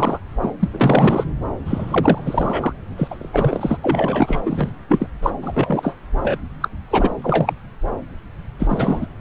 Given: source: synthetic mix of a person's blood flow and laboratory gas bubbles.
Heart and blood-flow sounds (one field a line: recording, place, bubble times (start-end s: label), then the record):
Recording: Doppler ultrasound of blood flow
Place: subclavian vein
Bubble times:
0.00-0.19 s: bubbles
0.41-0.51 s: bubbles
0.59-0.68 s: bubbles
0.71-1.25 s: bubbles
1.65-2.73 s: bubbles
2.97-3.77 s: bubbles
3.83-4.41 s: bubbles
4.45-4.72 s: bubbles
4.88-5.07 s: bubbles
5.23-5.31 s: bubbles
5.42-5.96 s: bubbles
6.22-6.39 s: bubbles
6.61-6.69 s: bubbles
6.90-7.12 s: bubbles
7.22-7.53 s: bubbles
8.59-9.07 s: bubbles
From the record:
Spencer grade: 3 (all of the cardiac periods contain showers or single bubble signals, but not dominating or overriding the cardiac motion signals)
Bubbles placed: anywhere in the cardiac cycle